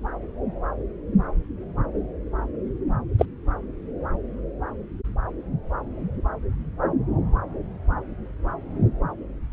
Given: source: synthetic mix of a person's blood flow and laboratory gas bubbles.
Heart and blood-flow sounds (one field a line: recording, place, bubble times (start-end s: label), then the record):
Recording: Doppler ultrasound of blood flow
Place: subclavian vein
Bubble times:
3.19-3.25 s: bubbles
From the record:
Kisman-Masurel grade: 112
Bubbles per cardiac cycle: 1 to 2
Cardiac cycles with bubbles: 1 to 10%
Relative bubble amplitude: moderate (0.250 to 0.450)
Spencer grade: 1 (occasional bubble signal discernible with the cardiac motion signal, with majority of cardiac periods free of bubbles)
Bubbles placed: anywhere in the cardiac cycle